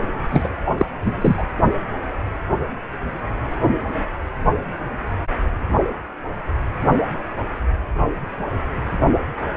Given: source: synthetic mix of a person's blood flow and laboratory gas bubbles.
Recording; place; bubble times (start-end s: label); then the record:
Doppler ultrasound of blood flow; precordium
0.30-0.48 s: bubbles
0.66-0.85 s: bubbles
1.04-1.46 s: bubbles
From the record:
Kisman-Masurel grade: 213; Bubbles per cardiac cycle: several, 3 to 8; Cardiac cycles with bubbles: 1 to 10%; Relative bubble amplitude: loud (0.450 to 0.775); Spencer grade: 1 (occasional bubble signal discernible with the cardiac motion signal, with majority of cardiac periods free of bubbles); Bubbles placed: anywhere in the cardiac cycle